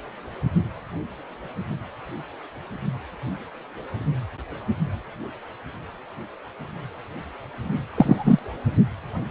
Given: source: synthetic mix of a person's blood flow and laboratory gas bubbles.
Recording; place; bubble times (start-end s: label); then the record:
Doppler ultrasound of blood flow; precordium
7.94-8.39 s: bubbles
From the record:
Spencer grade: 2 (many but less than half of the cardiac periods contain bubble signals, singularly or in groups); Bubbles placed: only in the low amplitude regions of the cardiac cycle